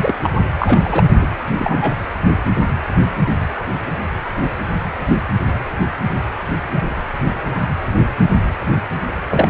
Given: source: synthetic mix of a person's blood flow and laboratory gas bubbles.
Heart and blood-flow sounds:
Doppler ultrasound of blood flow; precordium
0.00-0.15 s: bubbles
0.23-0.30 s: bubbles
0.38-0.43 s: bubbles
0.60-1.04 s: bubbles
1.18-1.28 s: bubbles
1.58-1.96 s: bubbles
9.30-9.48 s: bubbles
From the record:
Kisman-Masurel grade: 223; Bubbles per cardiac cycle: several, 3 to 8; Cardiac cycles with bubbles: 10 to 50%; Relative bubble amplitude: loud (0.450 to 0.775); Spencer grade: 2 (many but less than half of the cardiac periods contain bubble signals, singularly or in groups); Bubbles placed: anywhere in the cardiac cycle

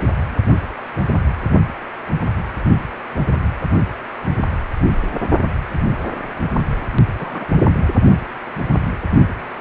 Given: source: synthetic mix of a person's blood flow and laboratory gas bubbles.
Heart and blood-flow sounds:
Doppler ultrasound of blood flow; precordium
7.19-7.46 s: bubbles
From the record:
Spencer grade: 1 (occasional bubble signal discernible with the cardiac motion signal, with majority of cardiac periods free of bubbles); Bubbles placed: only in the low amplitude regions of the cardiac cycle

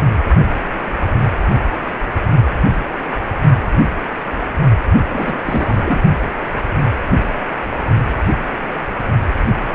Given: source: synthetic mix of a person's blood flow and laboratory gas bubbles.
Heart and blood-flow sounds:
Doppler ultrasound of blood flow; precordium
5.09-5.38 s: bubbles
5.45-6.00 s: bubbles
From the record:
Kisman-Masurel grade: 212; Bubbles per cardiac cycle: several, 3 to 8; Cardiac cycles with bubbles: 1 to 10%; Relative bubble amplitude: moderate (0.250 to 0.450); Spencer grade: 1 (occasional bubble signal discernible with the cardiac motion signal, with majority of cardiac periods free of bubbles); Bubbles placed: only in the low amplitude regions of the cardiac cycle

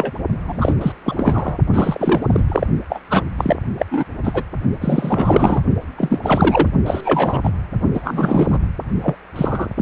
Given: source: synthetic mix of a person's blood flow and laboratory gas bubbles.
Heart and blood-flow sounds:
Doppler ultrasound of blood flow; precordium
0.00-0.12 s: bubbles
0.47-0.73 s: bubbles
0.81-0.92 s: bubbles
1.04-1.58 s: bubbles
1.73-2.44 s: bubbles
2.48-2.67 s: bubbles
2.90-2.99 s: bubbles
3.10-3.22 s: bubbles
3.38-3.56 s: bubbles
3.79-3.86 s: bubbles
3.91-4.04 s: bubbles
4.23-4.43 s: bubbles
4.80-5.62 s: bubbles
5.97-6.20 s: bubbles
6.22-6.68 s: bubbles
6.86-7.41 s: bubbles
7.43-7.50 s: bubbles
7.93-8.58 s: bubbles
9.03-9.16 s: bubbles
9.36-9.67 s: bubbles
9.77-9.82 s: bubbles
From the record:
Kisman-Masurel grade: 343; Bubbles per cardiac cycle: rolling drumbeat, 9 or more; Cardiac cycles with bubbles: 100%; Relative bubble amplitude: loud (0.450 to 0.775); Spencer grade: 3 (all of the cardiac periods contain showers or single bubble signals, but not dominating or overriding the cardiac motion signals); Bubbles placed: only in the low amplitude regions of the cardiac cycle

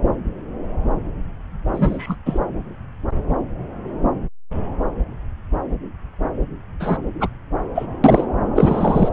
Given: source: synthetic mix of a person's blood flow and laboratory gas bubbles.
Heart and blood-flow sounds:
Doppler ultrasound of blood flow; subclavian vein
1.72-2.16 s: bubbles
2.25-2.39 s: bubbles
6.79-6.98 s: bubbles
7.20-7.29 s: bubbles
7.75-7.86 s: bubbles
8.04-8.26 s: bubbles
8.55-9.09 s: bubbles
From the record:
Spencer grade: 2 (many but less than half of the cardiac periods contain bubble signals, singularly or in groups); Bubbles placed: anywhere in the cardiac cycle

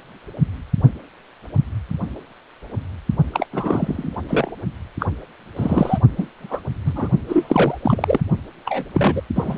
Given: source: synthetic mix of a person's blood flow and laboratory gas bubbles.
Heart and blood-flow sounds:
Doppler ultrasound of blood flow; precordium
3.33-3.46 s: bubbles
3.52-4.18 s: bubbles
4.28-4.50 s: bubbles
5.00-5.07 s: bubbles
5.57-5.99 s: bubbles
6.17-6.27 s: bubbles
6.40-6.61 s: bubbles
6.84-7.09 s: bubbles
7.29-7.78 s: bubbles
7.82-8.21 s: bubbles
8.65-8.85 s: bubbles
8.94-9.21 s: bubbles
9.36-9.57 s: bubbles
From the record:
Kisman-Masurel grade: 233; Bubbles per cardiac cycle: several, 3 to 8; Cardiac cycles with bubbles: 50 to 99%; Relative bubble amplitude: loud (0.450 to 0.775); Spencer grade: 3 (all of the cardiac periods contain showers or single bubble signals, but not dominating or overriding the cardiac motion signals); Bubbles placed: only in the low amplitude regions of the cardiac cycle

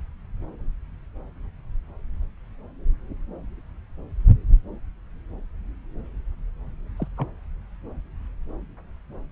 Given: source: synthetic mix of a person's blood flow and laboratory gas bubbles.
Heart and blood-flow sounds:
Doppler ultrasound of blood flow; subclavian vein
6.96-7.08 s: bubbles
7.18-7.27 s: bubbles
From the record:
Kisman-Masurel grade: 111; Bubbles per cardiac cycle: 1 to 2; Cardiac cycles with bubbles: 1 to 10%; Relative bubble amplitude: barely perceptible (0.100 to 0.250); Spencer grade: 1 (occasional bubble signal discernible with the cardiac motion signal, with majority of cardiac periods free of bubbles); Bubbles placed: anywhere in the cardiac cycle

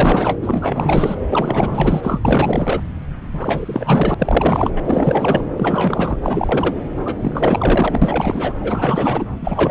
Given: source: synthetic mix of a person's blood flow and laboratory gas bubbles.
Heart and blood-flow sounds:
Doppler ultrasound of blood flow; subclavian vein
0.00-0.35 s: bubbles
0.41-1.15 s: bubbles
1.30-2.19 s: bubbles
2.25-2.81 s: bubbles
3.33-4.15 s: bubbles
4.18-4.71 s: bubbles
4.75-4.83 s: bubbles
4.86-5.44 s: bubbles
5.57-6.17 s: bubbles
6.23-6.84 s: bubbles
7.05-7.17 s: bubbles
7.21-8.54 s: bubbles
8.61-9.26 s: bubbles
9.41-9.71 s: bubbles
From the record:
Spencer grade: 4 (maximum detectable bubble signal sounding continuously throughout systole and diastole of every cardiac period, and overriding the amplitude of the normal cardiac signals); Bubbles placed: anywhere in the cardiac cycle

